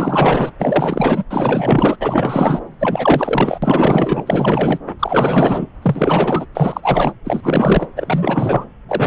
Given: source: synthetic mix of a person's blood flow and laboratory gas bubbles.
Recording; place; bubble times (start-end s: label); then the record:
Doppler ultrasound of blood flow; subclavian vein
0.00-0.51 s: bubbles
0.58-1.24 s: bubbles
1.30-1.97 s: bubbles
2.00-2.60 s: bubbles
2.80-3.59 s: bubbles
3.62-4.79 s: bubbles
4.99-5.67 s: bubbles
5.82-6.46 s: bubbles
6.55-7.13 s: bubbles
7.25-7.87 s: bubbles
7.96-8.64 s: bubbles
8.88-9.07 s: bubbles
From the record:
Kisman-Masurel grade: 444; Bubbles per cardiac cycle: continuous sound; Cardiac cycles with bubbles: 100%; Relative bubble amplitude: maximal (0.775 to 0.999); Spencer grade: 4 (maximum detectable bubble signal sounding continuously throughout systole and diastole of every cardiac period, and overriding the amplitude of the normal cardiac signals); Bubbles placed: anywhere in the cardiac cycle